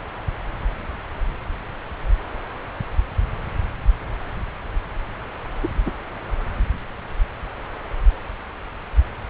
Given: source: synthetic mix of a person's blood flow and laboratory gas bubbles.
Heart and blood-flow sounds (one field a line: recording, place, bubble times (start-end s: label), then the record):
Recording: Doppler ultrasound of blood flow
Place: subclavian vein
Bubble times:
5.62-5.68 s: bubbles
5.86-5.91 s: bubbles
From the record:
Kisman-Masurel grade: 113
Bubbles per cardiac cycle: 1 to 2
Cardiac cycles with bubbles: 1 to 10%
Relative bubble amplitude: loud (0.450 to 0.775)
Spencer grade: 1 (occasional bubble signal discernible with the cardiac motion signal, with majority of cardiac periods free of bubbles)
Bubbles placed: anywhere in the cardiac cycle